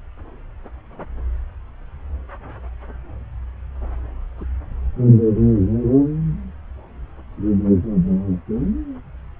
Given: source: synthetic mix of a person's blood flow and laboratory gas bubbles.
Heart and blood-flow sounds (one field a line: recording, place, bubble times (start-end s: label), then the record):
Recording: Doppler ultrasound of blood flow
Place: subclavian vein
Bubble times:
4.39-4.46 s: bubbles
From the record:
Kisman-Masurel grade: 111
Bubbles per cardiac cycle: 1 to 2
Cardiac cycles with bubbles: 1 to 10%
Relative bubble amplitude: barely perceptible (0.100 to 0.250)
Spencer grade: 1 (occasional bubble signal discernible with the cardiac motion signal, with majority of cardiac periods free of bubbles)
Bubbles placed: anywhere in the cardiac cycle